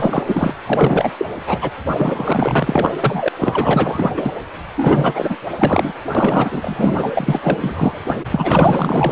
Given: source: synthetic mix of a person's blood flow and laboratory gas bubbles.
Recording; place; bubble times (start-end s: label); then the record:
Doppler ultrasound of blood flow; precordium
0.00-0.23 s: bubbles
0.26-0.54 s: bubbles
0.66-1.11 s: bubbles
1.18-1.26 s: bubbles
1.46-1.71 s: bubbles
1.95-2.97 s: bubbles
3.00-3.29 s: bubbles
3.39-4.33 s: bubbles
4.76-5.36 s: bubbles
5.51-5.93 s: bubbles
6.14-7.10 s: bubbles
7.14-8.00 s: bubbles
8.07-8.15 s: bubbles
8.31-9.12 s: bubbles
From the record:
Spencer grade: 4 (maximum detectable bubble signal sounding continuously throughout systole and diastole of every cardiac period, and overriding the amplitude of the normal cardiac signals); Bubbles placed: anywhere in the cardiac cycle